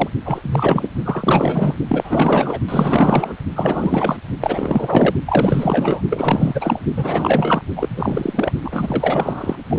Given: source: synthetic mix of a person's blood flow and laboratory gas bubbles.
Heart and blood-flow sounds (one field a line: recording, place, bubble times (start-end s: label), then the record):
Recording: Doppler ultrasound of blood flow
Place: precordium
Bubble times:
0.00-0.10 s: bubbles
0.25-0.91 s: bubbles
1.04-1.75 s: bubbles
1.89-2.60 s: bubbles
2.68-3.33 s: bubbles
3.55-4.18 s: bubbles
4.40-5.15 s: bubbles
5.25-6.02 s: bubbles
6.10-6.80 s: bubbles
6.96-7.62 s: bubbles
7.76-8.51 s: bubbles
8.63-9.55 s: bubbles
9.70-9.78 s: bubbles
From the record:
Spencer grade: 4 (maximum detectable bubble signal sounding continuously throughout systole and diastole of every cardiac period, and overriding the amplitude of the normal cardiac signals)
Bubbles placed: only in the low amplitude regions of the cardiac cycle